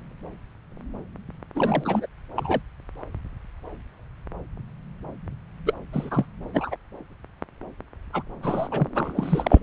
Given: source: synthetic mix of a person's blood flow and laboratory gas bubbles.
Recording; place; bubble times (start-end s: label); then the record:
Doppler ultrasound of blood flow; subclavian vein
1.55-2.06 s: bubbles
2.35-2.62 s: bubbles
5.66-5.74 s: bubbles
5.92-6.25 s: bubbles
6.54-6.75 s: bubbles
8.13-8.23 s: bubbles
8.43-8.69 s: bubbles
8.71-8.88 s: bubbles
8.95-9.12 s: bubbles
9.15-9.61 s: bubbles
From the record:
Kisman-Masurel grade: 222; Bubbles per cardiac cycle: several, 3 to 8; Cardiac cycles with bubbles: 10 to 50%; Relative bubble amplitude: moderate (0.250 to 0.450); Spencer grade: 2 (many but less than half of the cardiac periods contain bubble signals, singularly or in groups); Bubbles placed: anywhere in the cardiac cycle